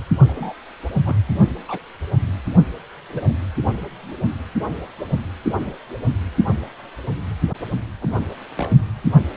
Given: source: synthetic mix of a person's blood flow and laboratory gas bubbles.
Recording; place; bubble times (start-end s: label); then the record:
Doppler ultrasound of blood flow; precordium
0.27-0.54 s: bubbles
1.05-1.16 s: bubbles
1.67-1.79 s: bubbles
3.09-3.32 s: bubbles
8.01-8.16 s: bubbles
8.57-8.71 s: bubbles
From the record:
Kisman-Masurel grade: 121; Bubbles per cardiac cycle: 1 to 2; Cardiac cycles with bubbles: 10 to 50%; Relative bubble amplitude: barely perceptible (0.100 to 0.250); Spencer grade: 2 (many but less than half of the cardiac periods contain bubble signals, singularly or in groups); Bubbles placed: only in the low amplitude regions of the cardiac cycle